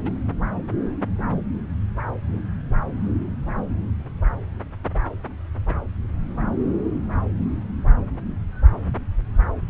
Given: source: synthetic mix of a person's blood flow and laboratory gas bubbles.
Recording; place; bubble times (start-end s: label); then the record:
Doppler ultrasound of blood flow; subclavian vein
0.05-0.11 s: bubbles
From the record:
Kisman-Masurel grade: 112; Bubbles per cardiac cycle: 1 to 2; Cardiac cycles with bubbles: 1 to 10%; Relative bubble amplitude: moderate (0.250 to 0.450); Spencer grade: 1 (occasional bubble signal discernible with the cardiac motion signal, with majority of cardiac periods free of bubbles); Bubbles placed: anywhere in the cardiac cycle